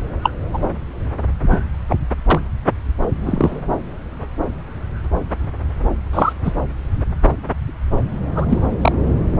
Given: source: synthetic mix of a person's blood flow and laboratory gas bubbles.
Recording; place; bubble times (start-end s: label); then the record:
Doppler ultrasound of blood flow; subclavian vein
0.23-0.31 s: bubbles
0.53-0.59 s: bubbles
1.49-1.59 s: bubbles
1.89-1.96 s: bubbles
2.30-2.41 s: bubbles
3.25-3.60 s: bubbles
6.13-6.33 s: bubbles
6.44-6.53 s: bubbles
8.35-8.46 s: bubbles
8.49-8.61 s: bubbles
8.81-8.93 s: bubbles
From the record:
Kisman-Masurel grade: 123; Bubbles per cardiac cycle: 1 to 2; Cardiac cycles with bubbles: 10 to 50%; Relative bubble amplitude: loud (0.450 to 0.775); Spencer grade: 2 (many but less than half of the cardiac periods contain bubble signals, singularly or in groups); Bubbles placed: anywhere in the cardiac cycle